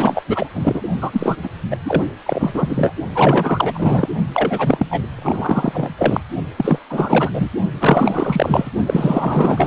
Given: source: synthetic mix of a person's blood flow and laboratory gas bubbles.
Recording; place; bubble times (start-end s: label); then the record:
Doppler ultrasound of blood flow; precordium
0.00-0.23 s: bubbles
0.27-0.49 s: bubbles
0.53-0.81 s: bubbles
1.00-1.36 s: bubbles
1.43-1.49 s: bubbles
1.70-1.76 s: bubbles
1.85-2.03 s: bubbles
2.26-2.93 s: bubbles
3.15-4.09 s: bubbles
4.33-4.86 s: bubbles
4.90-5.01 s: bubbles
5.15-5.90 s: bubbles
5.98-6.21 s: bubbles
6.57-6.79 s: bubbles
6.89-7.30 s: bubbles
7.33-7.50 s: bubbles
7.80-8.71 s: bubbles
8.86-9.67 s: bubbles
From the record:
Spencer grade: 4 (maximum detectable bubble signal sounding continuously throughout systole and diastole of every cardiac period, and overriding the amplitude of the normal cardiac signals); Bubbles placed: only in the low amplitude regions of the cardiac cycle